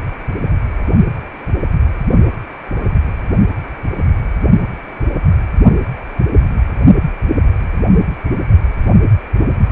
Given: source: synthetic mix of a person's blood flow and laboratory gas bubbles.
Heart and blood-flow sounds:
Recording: Doppler ultrasound of blood flow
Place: precordium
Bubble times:
no bubbles
From the record:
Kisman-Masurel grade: 000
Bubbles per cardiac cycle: 0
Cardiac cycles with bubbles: 0%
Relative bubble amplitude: no bubbles discernible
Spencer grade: 0 (complete lack of bubble signals)

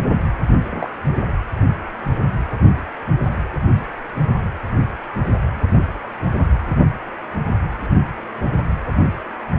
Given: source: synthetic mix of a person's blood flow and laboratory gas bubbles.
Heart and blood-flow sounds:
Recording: Doppler ultrasound of blood flow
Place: precordium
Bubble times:
0.71-0.90 s: bubbles
From the record:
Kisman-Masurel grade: 112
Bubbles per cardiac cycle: 1 to 2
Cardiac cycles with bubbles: 1 to 10%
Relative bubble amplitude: moderate (0.250 to 0.450)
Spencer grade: 1 (occasional bubble signal discernible with the cardiac motion signal, with majority of cardiac periods free of bubbles)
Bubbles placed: anywhere in the cardiac cycle

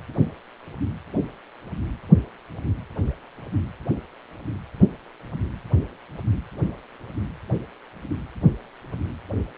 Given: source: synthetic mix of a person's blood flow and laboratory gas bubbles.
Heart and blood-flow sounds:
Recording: Doppler ultrasound of blood flow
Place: precordium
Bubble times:
no bubbles
From the record:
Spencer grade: 0 (complete lack of bubble signals)

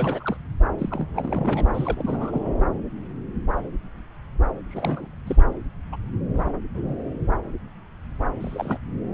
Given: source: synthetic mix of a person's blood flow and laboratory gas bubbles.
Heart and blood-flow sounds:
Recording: Doppler ultrasound of blood flow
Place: subclavian vein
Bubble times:
0.00-0.37 s: bubbles
0.78-1.68 s: bubbles
1.74-2.54 s: bubbles
4.70-5.13 s: bubbles
5.17-5.21 s: bubbles
5.26-5.37 s: bubbles
5.92-5.97 s: bubbles
6.38-6.44 s: bubbles
6.75-6.94 s: bubbles
8.39-8.78 s: bubbles
From the record:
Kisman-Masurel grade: 232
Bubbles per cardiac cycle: several, 3 to 8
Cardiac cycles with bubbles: 50 to 99%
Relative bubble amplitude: moderate (0.250 to 0.450)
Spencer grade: 3 (all of the cardiac periods contain showers or single bubble signals, but not dominating or overriding the cardiac motion signals)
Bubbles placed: anywhere in the cardiac cycle

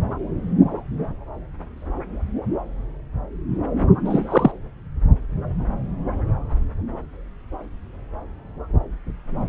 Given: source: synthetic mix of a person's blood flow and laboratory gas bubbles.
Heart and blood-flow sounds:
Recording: Doppler ultrasound of blood flow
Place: subclavian vein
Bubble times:
4.05-4.51 s: bubbles
From the record:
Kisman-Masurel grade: 213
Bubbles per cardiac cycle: several, 3 to 8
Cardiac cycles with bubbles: 1 to 10%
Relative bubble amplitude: loud (0.450 to 0.775)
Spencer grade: 1 (occasional bubble signal discernible with the cardiac motion signal, with majority of cardiac periods free of bubbles)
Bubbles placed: anywhere in the cardiac cycle

